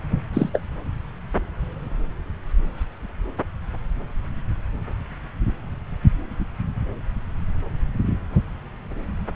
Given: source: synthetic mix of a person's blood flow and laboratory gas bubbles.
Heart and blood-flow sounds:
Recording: Doppler ultrasound of blood flow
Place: subclavian vein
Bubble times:
0.33-0.49 s: bubbles
0.53-0.60 s: bubbles
From the record:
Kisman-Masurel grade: 113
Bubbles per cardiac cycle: 1 to 2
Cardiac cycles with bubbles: 1 to 10%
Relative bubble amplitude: loud (0.450 to 0.775)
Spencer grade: 1 (occasional bubble signal discernible with the cardiac motion signal, with majority of cardiac periods free of bubbles)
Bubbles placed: anywhere in the cardiac cycle

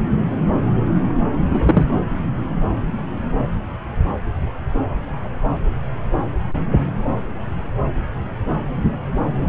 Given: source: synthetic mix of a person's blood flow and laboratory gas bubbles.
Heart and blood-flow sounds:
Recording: Doppler ultrasound of blood flow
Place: subclavian vein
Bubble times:
1.49-1.84 s: bubbles
From the record:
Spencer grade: 1 (occasional bubble signal discernible with the cardiac motion signal, with majority of cardiac periods free of bubbles)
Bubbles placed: anywhere in the cardiac cycle

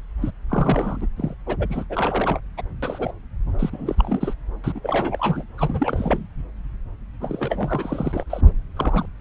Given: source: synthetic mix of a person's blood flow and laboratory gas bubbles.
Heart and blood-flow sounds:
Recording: Doppler ultrasound of blood flow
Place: subclavian vein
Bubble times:
0.22-0.30 s: bubbles
0.49-1.07 s: bubbles
1.17-1.34 s: bubbles
1.46-1.57 s: bubbles
1.59-1.67 s: bubbles
1.69-1.84 s: bubbles
1.90-2.40 s: bubbles
2.57-2.62 s: bubbles
2.82-3.11 s: bubbles
3.59-4.34 s: bubbles
4.63-4.72 s: bubbles
4.75-4.80 s: bubbles
4.83-5.43 s: bubbles
5.58-6.26 s: bubbles
7.21-8.27 s: bubbles
8.29-8.41 s: bubbles
8.76-9.06 s: bubbles
From the record:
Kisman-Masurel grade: 342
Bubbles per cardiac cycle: rolling drumbeat, 9 or more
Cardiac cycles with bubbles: 100%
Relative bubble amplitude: moderate (0.250 to 0.450)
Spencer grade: 3 (all of the cardiac periods contain showers or single bubble signals, but not dominating or overriding the cardiac motion signals)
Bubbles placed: anywhere in the cardiac cycle

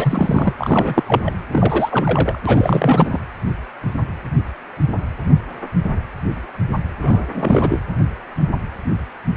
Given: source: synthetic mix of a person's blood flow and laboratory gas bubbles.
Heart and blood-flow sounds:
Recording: Doppler ultrasound of blood flow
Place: precordium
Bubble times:
0.00-0.54 s: bubbles
0.59-1.04 s: bubbles
1.06-1.31 s: bubbles
1.52-2.38 s: bubbles
2.46-3.19 s: bubbles
7.02-7.80 s: bubbles
From the record:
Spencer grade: 3 (all of the cardiac periods contain showers or single bubble signals, but not dominating or overriding the cardiac motion signals)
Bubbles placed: anywhere in the cardiac cycle

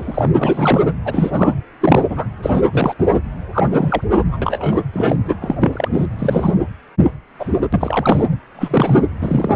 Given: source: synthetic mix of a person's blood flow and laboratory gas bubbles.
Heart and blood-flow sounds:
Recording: Doppler ultrasound of blood flow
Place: precordium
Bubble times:
0.00-0.29 s: bubbles
0.36-0.83 s: bubbles
1.04-1.54 s: bubbles
1.81-2.05 s: bubbles
2.09-2.27 s: bubbles
2.42-2.50 s: bubbles
2.53-2.62 s: bubbles
2.71-2.94 s: bubbles
2.98-3.06 s: bubbles
3.12-3.21 s: bubbles
3.53-3.68 s: bubbles
3.71-4.39 s: bubbles
4.42-4.80 s: bubbles
4.93-5.16 s: bubbles
5.24-5.38 s: bubbles
5.41-5.55 s: bubbles
5.62-5.88 s: bubbles
5.92-6.06 s: bubbles
6.17-6.54 s: bubbles
7.39-7.67 s: bubbles
7.73-8.29 s: bubbles
8.55-9.00 s: bubbles
9.22-9.56 s: bubbles
From the record:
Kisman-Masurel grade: 243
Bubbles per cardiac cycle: several, 3 to 8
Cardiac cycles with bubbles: 100%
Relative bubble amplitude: loud (0.450 to 0.775)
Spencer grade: 3 (all of the cardiac periods contain showers or single bubble signals, but not dominating or overriding the cardiac motion signals)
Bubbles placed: anywhere in the cardiac cycle

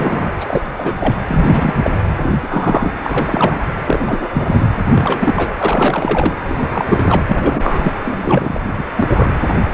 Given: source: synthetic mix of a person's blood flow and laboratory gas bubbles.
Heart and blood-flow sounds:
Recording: Doppler ultrasound of blood flow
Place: precordium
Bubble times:
0.00-0.31 s: bubbles
0.40-0.45 s: bubbles
0.49-0.61 s: bubbles
0.74-0.93 s: bubbles
0.99-1.17 s: bubbles
1.28-1.73 s: bubbles
1.84-1.90 s: bubbles
2.23-2.35 s: bubbles
2.42-3.00 s: bubbles
3.03-3.60 s: bubbles
3.86-4.68 s: bubbles
4.90-5.56 s: bubbles
5.59-6.34 s: bubbles
6.48-7.21 s: bubbles
7.26-7.92 s: bubbles
8.04-8.61 s: bubbles
8.77-8.86 s: bubbles
8.96-9.40 s: bubbles
9.48-9.56 s: bubbles
From the record:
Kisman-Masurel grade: 342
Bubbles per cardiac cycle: rolling drumbeat, 9 or more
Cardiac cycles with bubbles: 100%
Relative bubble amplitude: moderate (0.250 to 0.450)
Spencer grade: 3 (all of the cardiac periods contain showers or single bubble signals, but not dominating or overriding the cardiac motion signals)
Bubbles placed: anywhere in the cardiac cycle

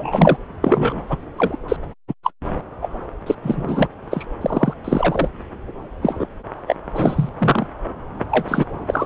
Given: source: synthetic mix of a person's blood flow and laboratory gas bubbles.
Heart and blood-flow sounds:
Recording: Doppler ultrasound of blood flow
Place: subclavian vein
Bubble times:
0.00-0.36 s: bubbles
0.63-1.04 s: bubbles
1.08-1.22 s: bubbles
1.36-1.56 s: bubbles
1.68-1.77 s: bubbles
2.08-2.14 s: bubbles
2.23-2.31 s: bubbles
2.81-2.89 s: bubbles
3.26-3.35 s: bubbles
3.42-3.88 s: bubbles
4.10-4.25 s: bubbles
4.41-4.74 s: bubbles
4.84-5.29 s: bubbles
6.01-6.26 s: bubbles
6.67-6.75 s: bubbles
6.95-7.29 s: bubbles
7.38-7.67 s: bubbles
8.29-8.65 s: bubbles
8.87-9.06 s: bubbles
From the record:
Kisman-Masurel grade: 243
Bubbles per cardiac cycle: several, 3 to 8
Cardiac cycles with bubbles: 100%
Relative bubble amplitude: loud (0.450 to 0.775)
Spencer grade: 3 (all of the cardiac periods contain showers or single bubble signals, but not dominating or overriding the cardiac motion signals)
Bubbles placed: anywhere in the cardiac cycle

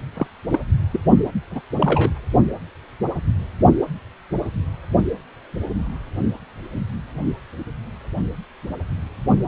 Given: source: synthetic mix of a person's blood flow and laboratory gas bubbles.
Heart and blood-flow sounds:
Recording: Doppler ultrasound of blood flow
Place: precordium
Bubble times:
0.14-0.27 s: bubbles
0.51-0.59 s: bubbles
0.90-1.00 s: bubbles
1.51-1.61 s: bubbles
1.79-2.10 s: bubbles
From the record:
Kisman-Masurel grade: 222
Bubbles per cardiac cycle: several, 3 to 8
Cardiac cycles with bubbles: 10 to 50%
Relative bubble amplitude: moderate (0.250 to 0.450)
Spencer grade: 2 (many but less than half of the cardiac periods contain bubble signals, singularly or in groups)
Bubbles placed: only in the low amplitude regions of the cardiac cycle

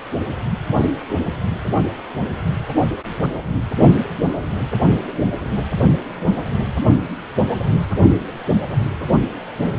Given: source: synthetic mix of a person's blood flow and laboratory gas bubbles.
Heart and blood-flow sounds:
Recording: Doppler ultrasound of blood flow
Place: precordium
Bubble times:
no bubbles
From the record:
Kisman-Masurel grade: 000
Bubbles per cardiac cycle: 0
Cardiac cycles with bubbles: 0%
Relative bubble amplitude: no bubbles discernible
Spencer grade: 0 (complete lack of bubble signals)

